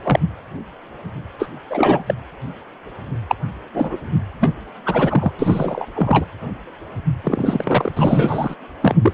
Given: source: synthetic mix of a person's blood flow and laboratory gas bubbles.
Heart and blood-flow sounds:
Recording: Doppler ultrasound of blood flow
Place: precordium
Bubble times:
0.04-0.20 s: bubbles
1.39-1.48 s: bubbles
1.69-2.14 s: bubbles
3.28-3.35 s: bubbles
3.73-3.97 s: bubbles
4.40-4.52 s: bubbles
4.85-5.32 s: bubbles
5.39-5.85 s: bubbles
5.95-6.26 s: bubbles
7.23-7.92 s: bubbles
7.96-8.55 s: bubbles
8.81-8.95 s: bubbles
9.02-9.13 s: bubbles
From the record:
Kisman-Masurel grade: 233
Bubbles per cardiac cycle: several, 3 to 8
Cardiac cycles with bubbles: 50 to 99%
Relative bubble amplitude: loud (0.450 to 0.775)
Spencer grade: 3 (all of the cardiac periods contain showers or single bubble signals, but not dominating or overriding the cardiac motion signals)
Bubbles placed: anywhere in the cardiac cycle

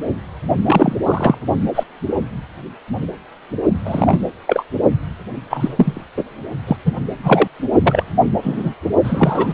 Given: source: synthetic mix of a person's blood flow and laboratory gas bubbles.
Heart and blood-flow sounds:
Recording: Doppler ultrasound of blood flow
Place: precordium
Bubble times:
0.66-0.95 s: bubbles
1.06-1.35 s: bubbles
1.75-1.83 s: bubbles
3.84-4.24 s: bubbles
4.47-4.63 s: bubbles
5.50-6.04 s: bubbles
6.17-6.24 s: bubbles
6.67-6.76 s: bubbles
6.86-6.92 s: bubbles
7.23-7.48 s: bubbles
7.83-8.03 s: bubbles
8.42-8.74 s: bubbles
9.04-9.53 s: bubbles
From the record:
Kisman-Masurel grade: 233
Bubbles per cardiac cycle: several, 3 to 8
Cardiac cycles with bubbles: 50 to 99%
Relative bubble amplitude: loud (0.450 to 0.775)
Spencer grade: 3 (all of the cardiac periods contain showers or single bubble signals, but not dominating or overriding the cardiac motion signals)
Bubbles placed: only in the low amplitude regions of the cardiac cycle

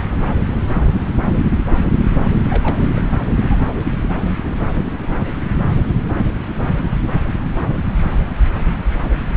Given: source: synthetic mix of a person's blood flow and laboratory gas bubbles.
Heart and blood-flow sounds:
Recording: Doppler ultrasound of blood flow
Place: subclavian vein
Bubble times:
2.16-2.29 s: bubbles
2.45-3.07 s: bubbles
3.34-3.58 s: bubbles
From the record:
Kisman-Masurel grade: 211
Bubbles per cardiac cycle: several, 3 to 8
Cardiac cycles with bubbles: 1 to 10%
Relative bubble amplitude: barely perceptible (0.100 to 0.250)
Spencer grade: 1 (occasional bubble signal discernible with the cardiac motion signal, with majority of cardiac periods free of bubbles)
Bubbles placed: anywhere in the cardiac cycle

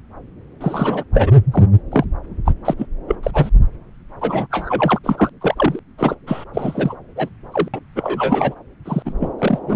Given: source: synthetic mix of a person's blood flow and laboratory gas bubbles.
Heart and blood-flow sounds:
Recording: Doppler ultrasound of blood flow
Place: subclavian vein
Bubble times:
0.60-1.04 s: bubbles
1.14-1.31 s: bubbles
1.53-1.65 s: bubbles
1.91-2.04 s: bubbles
2.45-2.51 s: bubbles
2.65-2.74 s: bubbles
2.77-2.86 s: bubbles
3.07-3.15 s: bubbles
3.23-3.31 s: bubbles
3.33-3.49 s: bubbles
4.21-4.46 s: bubbles
4.50-4.99 s: bubbles
5.04-5.29 s: bubbles
5.41-5.79 s: bubbles
5.98-6.15 s: bubbles
6.27-6.45 s: bubbles
6.54-6.96 s: bubbles
7.16-7.29 s: bubbles
7.52-7.69 s: bubbles
7.74-7.80 s: bubbles
7.96-8.54 s: bubbles
8.85-9.02 s: bubbles
9.05-9.12 s: bubbles
9.20-9.31 s: bubbles
9.38-9.59 s: bubbles
9.67-9.75 s: bubbles
From the record:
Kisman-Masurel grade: 343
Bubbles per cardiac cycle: rolling drumbeat, 9 or more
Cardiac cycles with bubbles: 100%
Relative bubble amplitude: loud (0.450 to 0.775)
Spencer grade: 3 (all of the cardiac periods contain showers or single bubble signals, but not dominating or overriding the cardiac motion signals)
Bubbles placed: anywhere in the cardiac cycle

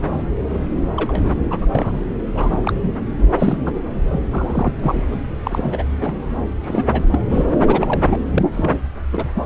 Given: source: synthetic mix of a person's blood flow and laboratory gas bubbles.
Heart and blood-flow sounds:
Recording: Doppler ultrasound of blood flow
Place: subclavian vein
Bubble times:
0.49-0.65 s: bubbles
0.96-1.30 s: bubbles
1.50-1.67 s: bubbles
1.75-2.04 s: bubbles
2.35-2.58 s: bubbles
2.62-2.92 s: bubbles
3.17-3.25 s: bubbles
3.38-3.58 s: bubbles
3.65-3.73 s: bubbles
4.12-4.21 s: bubbles
4.31-4.74 s: bubbles
4.82-5.04 s: bubbles
5.11-5.19 s: bubbles
5.43-5.84 s: bubbles
6.00-6.21 s: bubbles
6.62-6.88 s: bubbles
6.92-7.02 s: bubbles
7.10-7.19 s: bubbles
7.29-7.61 s: bubbles
7.67-8.16 s: bubbles
8.34-8.43 s: bubbles
8.52-8.77 s: bubbles
9.12-9.29 s: bubbles
9.36-9.44 s: bubbles
From the record:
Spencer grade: 3 (all of the cardiac periods contain showers or single bubble signals, but not dominating or overriding the cardiac motion signals)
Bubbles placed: anywhere in the cardiac cycle

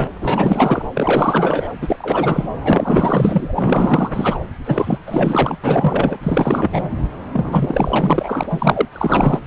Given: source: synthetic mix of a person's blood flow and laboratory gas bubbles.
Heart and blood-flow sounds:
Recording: Doppler ultrasound of blood flow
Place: subclavian vein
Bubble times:
0.00-0.09 s: bubbles
0.20-0.86 s: bubbles
0.94-1.72 s: bubbles
1.81-2.48 s: bubbles
2.64-4.09 s: bubbles
4.13-4.38 s: bubbles
4.64-4.98 s: bubbles
5.06-5.56 s: bubbles
5.63-6.18 s: bubbles
6.23-6.89 s: bubbles
7.31-8.44 s: bubbles
8.50-8.85 s: bubbles
8.93-9.40 s: bubbles
From the record:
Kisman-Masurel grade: 444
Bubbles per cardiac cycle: continuous sound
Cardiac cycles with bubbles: 100%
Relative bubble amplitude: maximal (0.775 to 0.999)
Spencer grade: 4 (maximum detectable bubble signal sounding continuously throughout systole and diastole of every cardiac period, and overriding the amplitude of the normal cardiac signals)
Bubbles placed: anywhere in the cardiac cycle

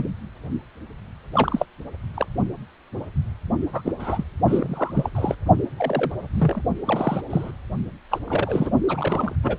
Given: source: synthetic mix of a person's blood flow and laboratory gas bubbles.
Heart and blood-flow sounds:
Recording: Doppler ultrasound of blood flow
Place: precordium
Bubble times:
0.00-0.08 s: bubbles
1.32-1.66 s: bubbles
2.15-2.27 s: bubbles
3.73-3.81 s: bubbles
3.85-3.92 s: bubbles
3.99-4.24 s: bubbles
4.47-5.10 s: bubbles
5.14-5.35 s: bubbles
5.77-6.12 s: bubbles
6.34-6.62 s: bubbles
6.85-7.21 s: bubbles
7.29-7.51 s: bubbles
8.11-8.19 s: bubbles
8.27-8.71 s: bubbles
8.88-9.36 s: bubbles
9.42-9.58 s: bubbles
From the record:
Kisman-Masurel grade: 233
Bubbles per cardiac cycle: several, 3 to 8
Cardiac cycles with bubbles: 50 to 99%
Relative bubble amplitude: loud (0.450 to 0.775)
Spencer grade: 3 (all of the cardiac periods contain showers or single bubble signals, but not dominating or overriding the cardiac motion signals)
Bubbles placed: only in the low amplitude regions of the cardiac cycle

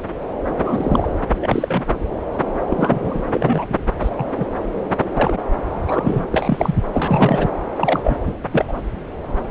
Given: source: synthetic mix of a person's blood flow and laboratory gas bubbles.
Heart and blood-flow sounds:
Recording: Doppler ultrasound of blood flow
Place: subclavian vein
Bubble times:
0.57-1.07 s: bubbles
1.42-2.04 s: bubbles
2.70-3.02 s: bubbles
3.04-3.23 s: bubbles
3.35-3.65 s: bubbles
3.69-3.75 s: bubbles
4.00-4.09 s: bubbles
4.16-4.47 s: bubbles
5.14-5.39 s: bubbles
5.70-6.25 s: bubbles
6.31-6.75 s: bubbles
6.93-7.49 s: bubbles
7.76-7.99 s: bubbles
8.04-8.18 s: bubbles
8.28-8.33 s: bubbles
8.52-8.65 s: bubbles
8.68-8.73 s: bubbles
From the record:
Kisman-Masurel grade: 232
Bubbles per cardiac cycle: several, 3 to 8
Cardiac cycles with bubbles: 50 to 99%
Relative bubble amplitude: moderate (0.250 to 0.450)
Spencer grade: 3 (all of the cardiac periods contain showers or single bubble signals, but not dominating or overriding the cardiac motion signals)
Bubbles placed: anywhere in the cardiac cycle

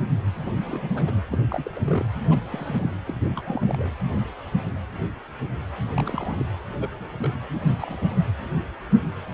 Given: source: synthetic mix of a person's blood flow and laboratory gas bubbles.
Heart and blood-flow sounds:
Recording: Doppler ultrasound of blood flow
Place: precordium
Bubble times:
0.40-0.56 s: bubbles
0.60-0.91 s: bubbles
0.94-1.16 s: bubbles
1.31-1.39 s: bubbles
1.50-1.71 s: bubbles
1.75-2.07 s: bubbles
2.29-2.40 s: bubbles
2.49-2.94 s: bubbles
3.07-3.14 s: bubbles
3.21-3.90 s: bubbles
5.96-6.46 s: bubbles
6.79-6.89 s: bubbles
7.00-7.07 s: bubbles
7.20-7.30 s: bubbles
7.81-8.17 s: bubbles
From the record:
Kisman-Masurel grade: 221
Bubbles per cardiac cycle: several, 3 to 8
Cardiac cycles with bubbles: 10 to 50%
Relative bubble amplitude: barely perceptible (0.100 to 0.250)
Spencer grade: 2 (many but less than half of the cardiac periods contain bubble signals, singularly or in groups)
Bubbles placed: anywhere in the cardiac cycle

